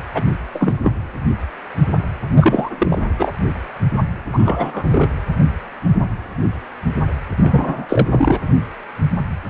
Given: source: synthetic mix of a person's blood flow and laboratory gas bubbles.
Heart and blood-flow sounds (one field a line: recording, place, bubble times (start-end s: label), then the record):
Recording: Doppler ultrasound of blood flow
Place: precordium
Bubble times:
0.14-0.23 s: bubbles
0.54-0.74 s: bubbles
0.83-0.93 s: bubbles
2.36-2.69 s: bubbles
2.78-3.05 s: bubbles
3.18-3.32 s: bubbles
4.33-5.08 s: bubbles
7.37-7.86 s: bubbles
7.89-8.07 s: bubbles
8.12-8.41 s: bubbles
From the record:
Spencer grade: 3 (all of the cardiac periods contain showers or single bubble signals, but not dominating or overriding the cardiac motion signals)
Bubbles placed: anywhere in the cardiac cycle